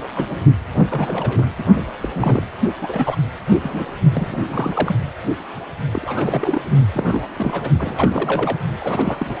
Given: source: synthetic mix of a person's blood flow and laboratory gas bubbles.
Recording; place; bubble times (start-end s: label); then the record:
Doppler ultrasound of blood flow; precordium
0.00-0.03 s: bubbles
0.16-0.25 s: bubbles
0.30-0.37 s: bubbles
0.67-1.47 s: bubbles
1.58-1.65 s: bubbles
1.75-1.96 s: bubbles
2.01-2.09 s: bubbles
2.14-2.43 s: bubbles
2.81-3.16 s: bubbles
3.50-3.58 s: bubbles
3.63-3.85 s: bubbles
4.12-4.46 s: bubbles
4.50-4.96 s: bubbles
5.92-6.62 s: bubbles
6.92-7.28 s: bubbles
7.37-7.71 s: bubbles
7.78-8.58 s: bubbles
8.80-9.35 s: bubbles
From the record:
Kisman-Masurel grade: 332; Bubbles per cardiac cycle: rolling drumbeat, 9 or more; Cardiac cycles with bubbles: 50 to 99%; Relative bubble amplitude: moderate (0.250 to 0.450); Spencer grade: 3 (all of the cardiac periods contain showers or single bubble signals, but not dominating or overriding the cardiac motion signals); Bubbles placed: only in the low amplitude regions of the cardiac cycle